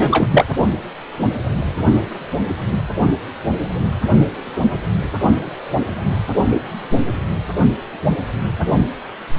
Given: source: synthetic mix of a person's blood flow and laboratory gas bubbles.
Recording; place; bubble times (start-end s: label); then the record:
Doppler ultrasound of blood flow; precordium
0.00-0.28 s: bubbles
0.31-0.45 s: bubbles
From the record:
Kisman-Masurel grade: 213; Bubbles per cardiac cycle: several, 3 to 8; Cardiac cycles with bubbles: 1 to 10%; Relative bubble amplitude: loud (0.450 to 0.775); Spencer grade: 1 (occasional bubble signal discernible with the cardiac motion signal, with majority of cardiac periods free of bubbles); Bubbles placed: only in the low amplitude regions of the cardiac cycle